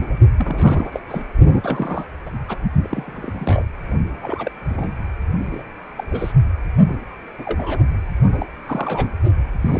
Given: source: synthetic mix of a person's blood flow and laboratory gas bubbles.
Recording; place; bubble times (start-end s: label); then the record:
Doppler ultrasound of blood flow; precordium
0.00-0.18 s: bubbles
0.38-0.99 s: bubbles
1.08-1.23 s: bubbles
1.53-2.07 s: bubbles
2.26-2.30 s: bubbles
2.48-2.58 s: bubbles
2.82-3.66 s: bubbles
4.22-4.51 s: bubbles
4.69-4.90 s: bubbles
5.50-5.63 s: bubbles
5.96-6.04 s: bubbles
6.11-6.32 s: bubbles
6.86-6.96 s: bubbles
7.38-7.80 s: bubbles
8.32-8.46 s: bubbles
8.65-9.08 s: bubbles
9.61-9.80 s: bubbles
From the record:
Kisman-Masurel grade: 242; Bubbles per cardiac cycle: several, 3 to 8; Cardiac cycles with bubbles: 100%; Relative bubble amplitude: moderate (0.250 to 0.450); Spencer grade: 3 (all of the cardiac periods contain showers or single bubble signals, but not dominating or overriding the cardiac motion signals); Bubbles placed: only in the low amplitude regions of the cardiac cycle